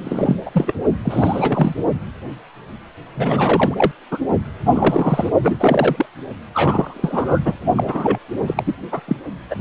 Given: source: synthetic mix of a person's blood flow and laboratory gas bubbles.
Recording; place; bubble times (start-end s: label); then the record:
Doppler ultrasound of blood flow; precordium
0.04-0.36 s: bubbles
0.45-0.49 s: bubbles
0.54-0.73 s: bubbles
1.04-1.74 s: bubbles
3.17-3.92 s: bubbles
4.11-4.18 s: bubbles
4.64-5.30 s: bubbles
5.42-5.56 s: bubbles
5.59-6.06 s: bubbles
6.54-7.57 s: bubbles
7.75-8.19 s: bubbles
8.46-8.75 s: bubbles
8.91-9.01 s: bubbles
9.07-9.16 s: bubbles
9.50-9.55 s: bubbles
From the record:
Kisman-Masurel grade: 332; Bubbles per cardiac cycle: rolling drumbeat, 9 or more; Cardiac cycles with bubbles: 50 to 99%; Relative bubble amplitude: moderate (0.250 to 0.450); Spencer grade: 3 (all of the cardiac periods contain showers or single bubble signals, but not dominating or overriding the cardiac motion signals); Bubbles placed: only in the low amplitude regions of the cardiac cycle